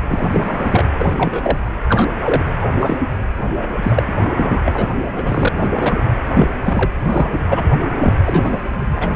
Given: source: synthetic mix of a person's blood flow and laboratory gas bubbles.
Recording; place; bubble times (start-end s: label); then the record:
Doppler ultrasound of blood flow; precordium
0.08-0.85 s: bubbles
0.99-1.14 s: bubbles
1.16-1.58 s: bubbles
1.89-2.12 s: bubbles
2.17-2.43 s: bubbles
2.61-2.69 s: bubbles
2.73-3.00 s: bubbles
3.58-3.67 s: bubbles
3.82-4.02 s: bubbles
4.07-4.13 s: bubbles
4.16-4.61 s: bubbles
4.65-4.89 s: bubbles
5.17-5.49 s: bubbles
5.52-5.69 s: bubbles
5.75-6.01 s: bubbles
6.33-6.48 s: bubbles
6.64-6.90 s: bubbles
7.04-7.30 s: bubbles
7.46-7.63 s: bubbles
7.95-8.13 s: bubbles
8.25-8.87 s: bubbles
8.95-9.10 s: bubbles
From the record:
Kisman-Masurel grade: 243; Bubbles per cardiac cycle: several, 3 to 8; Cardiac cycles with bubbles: 100%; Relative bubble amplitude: loud (0.450 to 0.775); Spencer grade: 3 (all of the cardiac periods contain showers or single bubble signals, but not dominating or overriding the cardiac motion signals); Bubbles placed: anywhere in the cardiac cycle